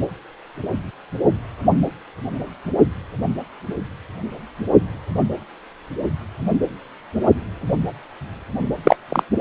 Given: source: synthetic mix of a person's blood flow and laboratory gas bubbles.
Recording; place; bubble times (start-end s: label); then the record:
Doppler ultrasound of blood flow; precordium
8.83-8.96 s: bubbles
9.08-9.23 s: bubbles
From the record:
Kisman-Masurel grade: 113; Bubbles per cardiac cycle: 1 to 2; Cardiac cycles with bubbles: 1 to 10%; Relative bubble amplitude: loud (0.450 to 0.775); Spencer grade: 1 (occasional bubble signal discernible with the cardiac motion signal, with majority of cardiac periods free of bubbles); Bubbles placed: anywhere in the cardiac cycle